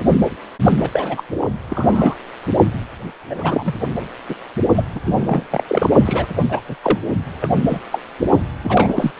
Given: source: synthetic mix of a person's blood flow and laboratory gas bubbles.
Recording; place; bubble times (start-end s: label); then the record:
Doppler ultrasound of blood flow; precordium
0.65-0.73 s: bubbles
0.78-0.90 s: bubbles
0.93-1.23 s: bubbles
1.70-2.15 s: bubbles
3.29-3.35 s: bubbles
3.38-3.75 s: bubbles
4.29-4.35 s: bubbles
4.75-4.85 s: bubbles
4.95-5.00 s: bubbles
5.06-5.44 s: bubbles
5.51-5.64 s: bubbles
5.67-5.90 s: bubbles
6.05-6.27 s: bubbles
6.49-6.60 s: bubbles
6.68-6.76 s: bubbles
6.82-6.99 s: bubbles
7.40-7.49 s: bubbles
7.70-7.80 s: bubbles
7.92-7.98 s: bubbles
8.63-9.12 s: bubbles
From the record:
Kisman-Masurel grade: 242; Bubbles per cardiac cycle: several, 3 to 8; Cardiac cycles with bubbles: 100%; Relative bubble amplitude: moderate (0.250 to 0.450); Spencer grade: 3 (all of the cardiac periods contain showers or single bubble signals, but not dominating or overriding the cardiac motion signals); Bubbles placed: only in the low amplitude regions of the cardiac cycle